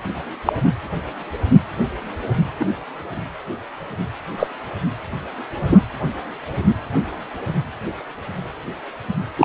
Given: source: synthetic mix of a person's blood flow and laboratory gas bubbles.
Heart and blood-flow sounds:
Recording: Doppler ultrasound of blood flow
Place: precordium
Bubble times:
0.45-0.53 s: bubbles
2.59-2.65 s: bubbles
4.37-4.48 s: bubbles
5.61-5.79 s: bubbles
9.38-9.45 s: bubbles
From the record:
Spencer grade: 2 (many but less than half of the cardiac periods contain bubble signals, singularly or in groups)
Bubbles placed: anywhere in the cardiac cycle

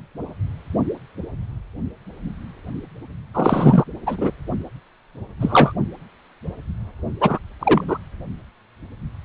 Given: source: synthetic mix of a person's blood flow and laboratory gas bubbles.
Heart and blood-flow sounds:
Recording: Doppler ultrasound of blood flow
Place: precordium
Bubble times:
3.34-3.84 s: bubbles
4.07-4.31 s: bubbles
5.40-5.73 s: bubbles
7.21-7.39 s: bubbles
7.59-7.84 s: bubbles
7.88-7.98 s: bubbles
From the record:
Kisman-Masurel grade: 223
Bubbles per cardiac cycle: several, 3 to 8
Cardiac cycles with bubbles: 10 to 50%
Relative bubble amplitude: loud (0.450 to 0.775)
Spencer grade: 2 (many but less than half of the cardiac periods contain bubble signals, singularly or in groups)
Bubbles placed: only in the low amplitude regions of the cardiac cycle

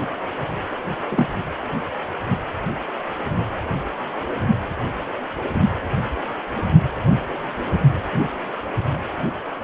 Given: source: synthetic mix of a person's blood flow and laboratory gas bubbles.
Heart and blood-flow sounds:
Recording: Doppler ultrasound of blood flow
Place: precordium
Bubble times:
1.10-1.27 s: bubbles
From the record:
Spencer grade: 1 (occasional bubble signal discernible with the cardiac motion signal, with majority of cardiac periods free of bubbles)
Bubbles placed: anywhere in the cardiac cycle

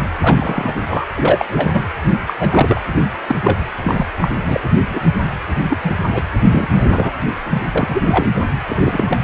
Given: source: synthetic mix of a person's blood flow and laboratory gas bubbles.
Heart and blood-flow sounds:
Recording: Doppler ultrasound of blood flow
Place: precordium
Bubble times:
0.20-0.73 s: bubbles
0.88-1.04 s: bubbles
1.16-1.45 s: bubbles
1.52-1.87 s: bubbles
2.27-2.34 s: bubbles
2.40-2.81 s: bubbles
3.28-3.35 s: bubbles
3.43-3.60 s: bubbles
3.83-4.06 s: bubbles
4.17-4.28 s: bubbles
4.46-4.70 s: bubbles
4.90-5.00 s: bubbles
5.69-5.78 s: bubbles
5.83-5.91 s: bubbles
6.14-6.22 s: bubbles
6.50-6.68 s: bubbles
6.71-7.12 s: bubbles
7.27-7.32 s: bubbles
7.50-7.62 s: bubbles
7.75-8.28 s: bubbles
8.68-9.04 s: bubbles
9.08-9.17 s: bubbles
From the record:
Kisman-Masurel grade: 242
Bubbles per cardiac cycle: several, 3 to 8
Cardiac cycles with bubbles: 100%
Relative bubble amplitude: moderate (0.250 to 0.450)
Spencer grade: 3 (all of the cardiac periods contain showers or single bubble signals, but not dominating or overriding the cardiac motion signals)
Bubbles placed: anywhere in the cardiac cycle

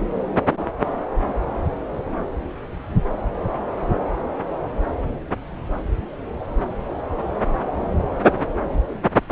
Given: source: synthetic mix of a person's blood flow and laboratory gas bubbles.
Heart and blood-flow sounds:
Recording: Doppler ultrasound of blood flow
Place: subclavian vein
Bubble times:
no bubbles
From the record:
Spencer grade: 0 (complete lack of bubble signals)

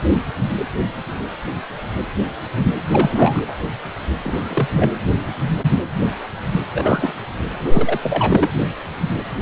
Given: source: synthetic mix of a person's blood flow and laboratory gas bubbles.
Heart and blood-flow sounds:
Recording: Doppler ultrasound of blood flow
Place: precordium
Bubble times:
2.91-3.43 s: bubbles
4.24-4.68 s: bubbles
4.75-4.91 s: bubbles
6.73-7.12 s: bubbles
7.68-7.99 s: bubbles
8.02-8.49 s: bubbles
From the record:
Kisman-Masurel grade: 223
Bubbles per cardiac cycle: several, 3 to 8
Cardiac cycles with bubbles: 10 to 50%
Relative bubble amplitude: loud (0.450 to 0.775)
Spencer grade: 2 (many but less than half of the cardiac periods contain bubble signals, singularly or in groups)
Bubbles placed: anywhere in the cardiac cycle

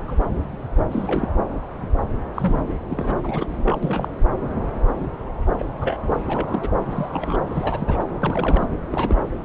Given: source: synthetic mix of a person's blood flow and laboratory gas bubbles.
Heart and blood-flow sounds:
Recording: Doppler ultrasound of blood flow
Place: subclavian vein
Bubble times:
0.00-0.02 s: bubbles
0.07-0.20 s: bubbles
0.92-1.30 s: bubbles
2.34-2.61 s: bubbles
2.89-3.58 s: bubbles
3.66-3.77 s: bubbles
3.83-4.11 s: bubbles
5.58-5.65 s: bubbles
5.81-6.15 s: bubbles
6.25-6.71 s: bubbles
6.81-7.38 s: bubbles
7.47-8.04 s: bubbles
8.22-8.68 s: bubbles
8.90-9.18 s: bubbles
From the record:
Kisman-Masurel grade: 232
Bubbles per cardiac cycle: several, 3 to 8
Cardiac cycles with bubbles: 50 to 99%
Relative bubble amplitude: moderate (0.250 to 0.450)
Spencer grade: 3 (all of the cardiac periods contain showers or single bubble signals, but not dominating or overriding the cardiac motion signals)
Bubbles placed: anywhere in the cardiac cycle

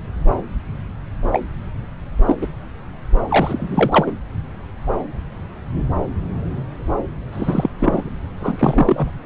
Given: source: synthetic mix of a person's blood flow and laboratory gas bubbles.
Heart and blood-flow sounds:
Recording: Doppler ultrasound of blood flow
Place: subclavian vein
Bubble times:
1.31-1.42 s: bubbles
2.25-2.35 s: bubbles
2.42-2.48 s: bubbles
3.29-4.15 s: bubbles
7.33-7.69 s: bubbles
7.78-8.13 s: bubbles
8.38-9.11 s: bubbles
From the record:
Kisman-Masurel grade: 223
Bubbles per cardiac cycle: several, 3 to 8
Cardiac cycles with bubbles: 10 to 50%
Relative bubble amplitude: loud (0.450 to 0.775)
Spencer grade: 2 (many but less than half of the cardiac periods contain bubble signals, singularly or in groups)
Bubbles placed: anywhere in the cardiac cycle

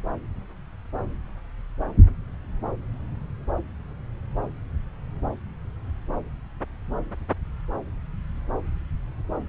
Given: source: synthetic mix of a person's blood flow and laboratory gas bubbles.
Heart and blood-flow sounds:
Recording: Doppler ultrasound of blood flow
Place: subclavian vein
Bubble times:
no bubbles
From the record:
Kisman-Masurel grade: 000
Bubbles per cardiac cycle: 0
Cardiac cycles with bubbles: 0%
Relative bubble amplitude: no bubbles discernible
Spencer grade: 0 (complete lack of bubble signals)

